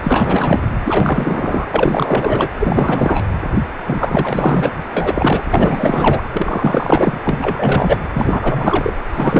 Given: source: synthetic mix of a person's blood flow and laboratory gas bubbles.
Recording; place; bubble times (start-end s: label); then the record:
Doppler ultrasound of blood flow; precordium
0.03-0.62 s: bubbles
0.85-1.67 s: bubbles
1.71-2.48 s: bubbles
2.59-3.25 s: bubbles
3.87-4.71 s: bubbles
4.96-5.43 s: bubbles
5.50-6.23 s: bubbles
6.32-7.18 s: bubbles
7.23-8.00 s: bubbles
8.13-8.96 s: bubbles
9.13-9.40 s: bubbles
From the record:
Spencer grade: 4 (maximum detectable bubble signal sounding continuously throughout systole and diastole of every cardiac period, and overriding the amplitude of the normal cardiac signals); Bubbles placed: anywhere in the cardiac cycle